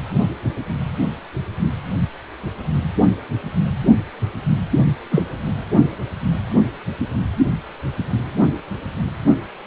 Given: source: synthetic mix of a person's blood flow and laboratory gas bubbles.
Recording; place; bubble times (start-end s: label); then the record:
Doppler ultrasound of blood flow; precordium
5.11-5.26 s: bubbles
From the record:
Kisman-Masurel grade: 113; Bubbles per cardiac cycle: 1 to 2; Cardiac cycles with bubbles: 1 to 10%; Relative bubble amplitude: loud (0.450 to 0.775); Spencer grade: 1 (occasional bubble signal discernible with the cardiac motion signal, with majority of cardiac periods free of bubbles); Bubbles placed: anywhere in the cardiac cycle